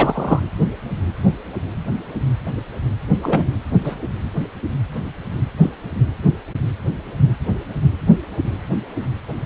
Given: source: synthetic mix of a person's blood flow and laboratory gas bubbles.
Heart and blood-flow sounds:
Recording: Doppler ultrasound of blood flow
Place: precordium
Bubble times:
0.00-0.39 s: bubbles
3.23-3.50 s: bubbles
3.84-3.96 s: bubbles
5.62-5.71 s: bubbles
From the record:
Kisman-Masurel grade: 123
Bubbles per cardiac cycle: 1 to 2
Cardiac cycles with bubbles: 10 to 50%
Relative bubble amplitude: loud (0.450 to 0.775)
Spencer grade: 2 (many but less than half of the cardiac periods contain bubble signals, singularly or in groups)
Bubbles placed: anywhere in the cardiac cycle

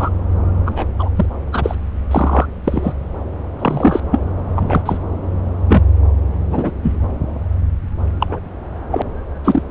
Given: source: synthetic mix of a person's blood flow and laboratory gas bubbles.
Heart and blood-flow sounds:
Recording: Doppler ultrasound of blood flow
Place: subclavian vein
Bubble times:
0.00-0.09 s: bubbles
0.66-0.86 s: bubbles
0.99-1.09 s: bubbles
1.16-1.25 s: bubbles
1.52-1.75 s: bubbles
2.11-2.46 s: bubbles
2.64-2.94 s: bubbles
3.58-4.00 s: bubbles
4.11-4.20 s: bubbles
4.55-4.82 s: bubbles
4.85-4.99 s: bubbles
5.67-5.82 s: bubbles
6.50-6.71 s: bubbles
6.83-6.92 s: bubbles
8.20-8.39 s: bubbles
8.91-9.02 s: bubbles
9.44-9.62 s: bubbles
From the record:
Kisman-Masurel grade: 243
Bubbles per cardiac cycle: several, 3 to 8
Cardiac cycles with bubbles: 100%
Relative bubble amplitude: loud (0.450 to 0.775)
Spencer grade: 3 (all of the cardiac periods contain showers or single bubble signals, but not dominating or overriding the cardiac motion signals)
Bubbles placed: anywhere in the cardiac cycle

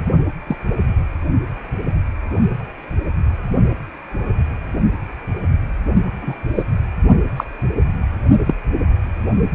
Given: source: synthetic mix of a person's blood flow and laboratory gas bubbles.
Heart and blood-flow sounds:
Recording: Doppler ultrasound of blood flow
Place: precordium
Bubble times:
0.47-0.57 s: bubbles
6.21-6.34 s: bubbles
6.55-6.63 s: bubbles
7.37-7.44 s: bubbles
8.47-8.54 s: bubbles
From the record:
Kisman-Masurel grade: 122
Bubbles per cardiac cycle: 1 to 2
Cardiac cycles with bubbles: 10 to 50%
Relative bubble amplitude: moderate (0.250 to 0.450)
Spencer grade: 2 (many but less than half of the cardiac periods contain bubble signals, singularly or in groups)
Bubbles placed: only in the low amplitude regions of the cardiac cycle

